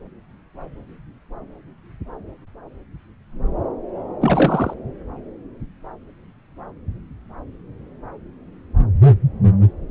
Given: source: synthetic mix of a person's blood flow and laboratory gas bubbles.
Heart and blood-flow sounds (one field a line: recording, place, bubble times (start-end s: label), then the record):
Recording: Doppler ultrasound of blood flow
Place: subclavian vein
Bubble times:
4.21-4.74 s: bubbles
From the record:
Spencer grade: 1 (occasional bubble signal discernible with the cardiac motion signal, with majority of cardiac periods free of bubbles)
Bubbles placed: anywhere in the cardiac cycle